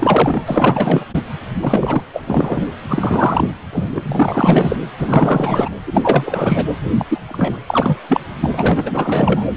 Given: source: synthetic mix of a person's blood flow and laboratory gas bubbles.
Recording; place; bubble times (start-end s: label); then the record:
Doppler ultrasound of blood flow; precordium
0.00-0.41 s: bubbles
0.47-1.05 s: bubbles
1.14-1.23 s: bubbles
1.55-2.03 s: bubbles
2.12-2.24 s: bubbles
2.27-2.66 s: bubbles
2.89-3.48 s: bubbles
3.73-4.77 s: bubbles
4.98-5.69 s: bubbles
5.87-6.67 s: bubbles
6.98-7.06 s: bubbles
7.08-7.19 s: bubbles
7.28-7.58 s: bubbles
7.67-8.00 s: bubbles
8.08-8.21 s: bubbles
8.40-9.48 s: bubbles
From the record:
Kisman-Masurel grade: 444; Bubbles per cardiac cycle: continuous sound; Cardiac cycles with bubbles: 100%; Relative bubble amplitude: maximal (0.775 to 0.999); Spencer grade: 4 (maximum detectable bubble signal sounding continuously throughout systole and diastole of every cardiac period, and overriding the amplitude of the normal cardiac signals); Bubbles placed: anywhere in the cardiac cycle